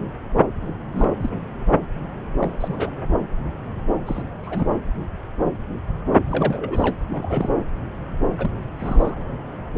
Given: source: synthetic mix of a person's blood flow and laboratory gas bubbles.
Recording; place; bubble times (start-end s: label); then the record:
Doppler ultrasound of blood flow; subclavian vein
0.92-1.30 s: bubbles
2.40-2.58 s: bubbles
2.60-2.91 s: bubbles
4.06-4.22 s: bubbles
4.44-4.70 s: bubbles
6.28-6.94 s: bubbles
7.09-7.50 s: bubbles
8.38-8.51 s: bubbles
8.79-9.15 s: bubbles
From the record:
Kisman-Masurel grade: 221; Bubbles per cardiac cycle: several, 3 to 8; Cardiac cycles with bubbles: 10 to 50%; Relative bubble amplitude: barely perceptible (0.100 to 0.250); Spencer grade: 2 (many but less than half of the cardiac periods contain bubble signals, singularly or in groups); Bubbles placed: anywhere in the cardiac cycle